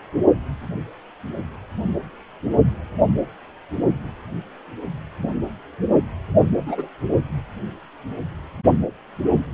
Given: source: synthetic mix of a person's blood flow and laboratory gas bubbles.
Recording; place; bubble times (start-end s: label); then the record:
Doppler ultrasound of blood flow; precordium
6.43-6.51 s: bubbles
6.54-6.88 s: bubbles
From the record:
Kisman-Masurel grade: 111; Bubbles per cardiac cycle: 1 to 2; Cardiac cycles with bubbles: 1 to 10%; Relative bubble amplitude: barely perceptible (0.100 to 0.250); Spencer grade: 1 (occasional bubble signal discernible with the cardiac motion signal, with majority of cardiac periods free of bubbles); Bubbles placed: only in the low amplitude regions of the cardiac cycle